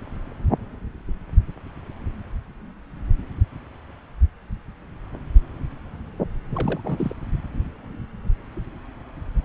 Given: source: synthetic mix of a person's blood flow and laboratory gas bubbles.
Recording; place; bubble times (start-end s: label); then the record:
Doppler ultrasound of blood flow; subclavian vein
6.50-6.80 s: bubbles
6.84-7.13 s: bubbles
From the record:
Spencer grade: 1 (occasional bubble signal discernible with the cardiac motion signal, with majority of cardiac periods free of bubbles); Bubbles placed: anywhere in the cardiac cycle